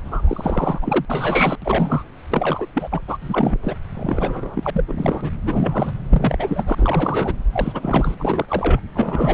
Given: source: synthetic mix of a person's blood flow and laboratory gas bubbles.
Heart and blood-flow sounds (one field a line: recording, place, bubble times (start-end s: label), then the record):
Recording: Doppler ultrasound of blood flow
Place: subclavian vein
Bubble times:
0.04-0.79 s: bubbles
0.81-1.05 s: bubbles
1.08-1.57 s: bubbles
1.62-2.04 s: bubbles
2.31-2.67 s: bubbles
2.73-3.02 s: bubbles
3.08-3.18 s: bubbles
3.21-3.58 s: bubbles
3.63-3.77 s: bubbles
3.95-4.84 s: bubbles
4.88-5.31 s: bubbles
5.46-5.92 s: bubbles
6.09-7.35 s: bubbles
7.52-8.14 s: bubbles
8.19-8.45 s: bubbles
8.48-8.80 s: bubbles
8.95-9.34 s: bubbles
From the record:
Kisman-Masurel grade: 342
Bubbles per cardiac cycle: rolling drumbeat, 9 or more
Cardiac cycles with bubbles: 100%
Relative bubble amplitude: moderate (0.250 to 0.450)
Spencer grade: 3 (all of the cardiac periods contain showers or single bubble signals, but not dominating or overriding the cardiac motion signals)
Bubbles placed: anywhere in the cardiac cycle